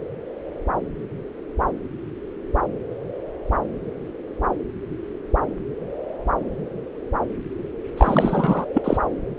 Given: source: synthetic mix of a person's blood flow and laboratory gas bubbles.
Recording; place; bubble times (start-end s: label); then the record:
Doppler ultrasound of blood flow; subclavian vein
7.97-8.65 s: bubbles
8.73-8.97 s: bubbles
From the record:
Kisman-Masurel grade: 213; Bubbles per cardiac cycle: several, 3 to 8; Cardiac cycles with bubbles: 1 to 10%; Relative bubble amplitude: loud (0.450 to 0.775); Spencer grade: 1 (occasional bubble signal discernible with the cardiac motion signal, with majority of cardiac periods free of bubbles); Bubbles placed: anywhere in the cardiac cycle